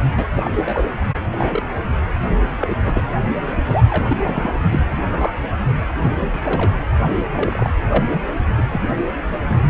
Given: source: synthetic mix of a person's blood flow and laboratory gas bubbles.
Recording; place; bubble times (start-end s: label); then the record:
Doppler ultrasound of blood flow; precordium
0.17-0.27 s: bubbles
0.36-0.52 s: bubbles
0.55-0.83 s: bubbles
1.32-1.63 s: bubbles
1.68-1.73 s: bubbles
2.58-2.75 s: bubbles
2.78-3.04 s: bubbles
3.65-4.54 s: bubbles
4.69-4.80 s: bubbles
5.11-5.32 s: bubbles
6.04-6.09 s: bubbles
6.14-6.76 s: bubbles
7.36-7.70 s: bubbles
7.88-8.04 s: bubbles
8.56-8.63 s: bubbles
8.69-8.81 s: bubbles
8.88-8.94 s: bubbles
9.44-9.60 s: bubbles
From the record:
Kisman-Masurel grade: 242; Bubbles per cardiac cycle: several, 3 to 8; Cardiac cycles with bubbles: 100%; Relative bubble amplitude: moderate (0.250 to 0.450); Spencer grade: 3 (all of the cardiac periods contain showers or single bubble signals, but not dominating or overriding the cardiac motion signals); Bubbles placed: anywhere in the cardiac cycle